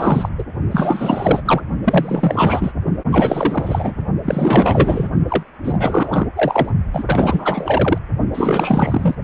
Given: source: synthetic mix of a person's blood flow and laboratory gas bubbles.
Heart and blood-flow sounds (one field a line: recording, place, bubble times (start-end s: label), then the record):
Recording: Doppler ultrasound of blood flow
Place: precordium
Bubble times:
0.00-0.29 s: bubbles
0.38-0.43 s: bubbles
0.71-1.61 s: bubbles
1.84-2.72 s: bubbles
3.11-3.94 s: bubbles
4.23-5.08 s: bubbles
5.29-5.43 s: bubbles
5.64-6.28 s: bubbles
6.36-6.70 s: bubbles
6.93-7.04 s: bubbles
7.07-7.98 s: bubbles
8.34-9.15 s: bubbles
From the record:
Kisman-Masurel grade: 444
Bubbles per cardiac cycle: continuous sound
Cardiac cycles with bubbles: 100%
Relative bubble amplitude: maximal (0.775 to 0.999)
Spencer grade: 4 (maximum detectable bubble signal sounding continuously throughout systole and diastole of every cardiac period, and overriding the amplitude of the normal cardiac signals)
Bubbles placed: only in the low amplitude regions of the cardiac cycle